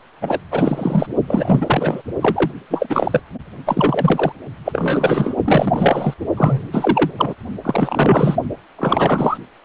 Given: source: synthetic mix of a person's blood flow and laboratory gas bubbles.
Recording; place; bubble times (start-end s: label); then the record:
Doppler ultrasound of blood flow; precordium
0.22-0.40 s: bubbles
0.51-1.06 s: bubbles
1.27-2.02 s: bubbles
2.21-2.51 s: bubbles
2.70-3.21 s: bubbles
3.66-4.32 s: bubbles
4.65-5.34 s: bubbles
5.44-6.14 s: bubbles
6.36-6.68 s: bubbles
6.72-7.11 s: bubbles
7.17-7.34 s: bubbles
7.64-8.36 s: bubbles
8.78-9.38 s: bubbles
From the record:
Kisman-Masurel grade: 343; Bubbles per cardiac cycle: rolling drumbeat, 9 or more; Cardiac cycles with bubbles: 100%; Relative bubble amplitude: loud (0.450 to 0.775); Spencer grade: 3 (all of the cardiac periods contain showers or single bubble signals, but not dominating or overriding the cardiac motion signals); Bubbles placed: only in the low amplitude regions of the cardiac cycle